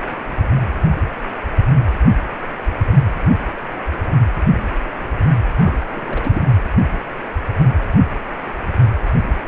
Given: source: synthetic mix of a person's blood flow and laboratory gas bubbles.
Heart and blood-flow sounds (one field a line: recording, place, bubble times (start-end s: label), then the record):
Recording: Doppler ultrasound of blood flow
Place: precordium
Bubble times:
5.56-5.72 s: bubbles
5.95-6.41 s: bubbles
From the record:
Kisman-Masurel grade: 211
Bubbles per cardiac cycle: several, 3 to 8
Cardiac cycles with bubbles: 1 to 10%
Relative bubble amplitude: barely perceptible (0.100 to 0.250)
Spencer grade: 1 (occasional bubble signal discernible with the cardiac motion signal, with majority of cardiac periods free of bubbles)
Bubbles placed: anywhere in the cardiac cycle